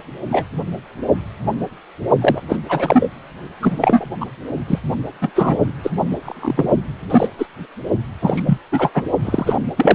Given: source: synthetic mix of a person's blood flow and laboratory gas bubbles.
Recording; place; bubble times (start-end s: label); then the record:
Doppler ultrasound of blood flow; precordium
0.29-0.45 s: bubbles
2.21-2.42 s: bubbles
2.49-2.57 s: bubbles
2.69-3.08 s: bubbles
3.62-4.11 s: bubbles
4.21-4.25 s: bubbles
4.67-4.79 s: bubbles
5.21-5.31 s: bubbles
5.36-5.57 s: bubbles
5.83-5.91 s: bubbles
6.11-6.16 s: bubbles
6.23-6.69 s: bubbles
7.09-7.29 s: bubbles
7.38-7.46 s: bubbles
8.21-8.42 s: bubbles
8.46-8.58 s: bubbles
8.71-8.91 s: bubbles
8.94-9.03 s: bubbles
9.24-9.59 s: bubbles
9.77-9.95 s: bubbles
From the record:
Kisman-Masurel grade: 233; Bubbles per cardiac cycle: several, 3 to 8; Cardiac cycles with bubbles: 50 to 99%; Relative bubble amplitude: loud (0.450 to 0.775); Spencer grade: 3 (all of the cardiac periods contain showers or single bubble signals, but not dominating or overriding the cardiac motion signals); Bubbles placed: only in the low amplitude regions of the cardiac cycle